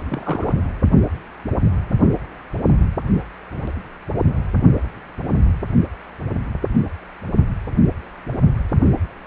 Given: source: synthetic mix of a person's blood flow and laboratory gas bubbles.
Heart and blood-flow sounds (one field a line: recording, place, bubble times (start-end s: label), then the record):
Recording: Doppler ultrasound of blood flow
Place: precordium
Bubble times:
0.08-0.55 s: bubbles
From the record:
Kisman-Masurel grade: 112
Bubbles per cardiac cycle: 1 to 2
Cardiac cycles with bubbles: 1 to 10%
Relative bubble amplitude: moderate (0.250 to 0.450)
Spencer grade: 1 (occasional bubble signal discernible with the cardiac motion signal, with majority of cardiac periods free of bubbles)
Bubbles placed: only in the low amplitude regions of the cardiac cycle